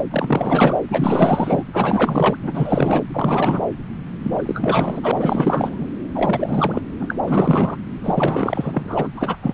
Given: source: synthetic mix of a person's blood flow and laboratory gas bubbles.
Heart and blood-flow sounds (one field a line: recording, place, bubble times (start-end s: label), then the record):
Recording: Doppler ultrasound of blood flow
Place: subclavian vein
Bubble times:
0.00-0.03 s: bubbles
0.11-0.80 s: bubbles
0.88-1.64 s: bubbles
1.73-2.37 s: bubbles
2.42-3.04 s: bubbles
3.12-3.63 s: bubbles
4.23-5.12 s: bubbles
5.14-5.87 s: bubbles
6.15-6.82 s: bubbles
7.00-7.16 s: bubbles
7.27-7.77 s: bubbles
8.03-9.07 s: bubbles
9.17-9.37 s: bubbles
9.42-9.54 s: bubbles
From the record:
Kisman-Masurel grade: 444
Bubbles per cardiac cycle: continuous sound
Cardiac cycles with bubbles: 100%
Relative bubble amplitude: maximal (0.775 to 0.999)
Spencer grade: 4 (maximum detectable bubble signal sounding continuously throughout systole and diastole of every cardiac period, and overriding the amplitude of the normal cardiac signals)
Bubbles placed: anywhere in the cardiac cycle